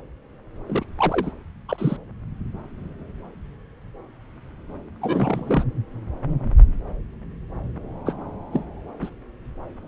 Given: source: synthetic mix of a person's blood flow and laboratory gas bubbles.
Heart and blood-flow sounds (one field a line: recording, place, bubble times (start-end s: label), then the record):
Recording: Doppler ultrasound of blood flow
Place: subclavian vein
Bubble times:
0.67-0.84 s: bubbles
0.98-1.31 s: bubbles
1.69-1.96 s: bubbles
5.01-5.64 s: bubbles
8.06-8.13 s: bubbles
8.52-8.65 s: bubbles
9.02-9.10 s: bubbles
From the record:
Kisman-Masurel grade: 222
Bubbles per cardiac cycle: several, 3 to 8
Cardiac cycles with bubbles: 10 to 50%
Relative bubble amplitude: moderate (0.250 to 0.450)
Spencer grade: 2 (many but less than half of the cardiac periods contain bubble signals, singularly or in groups)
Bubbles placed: anywhere in the cardiac cycle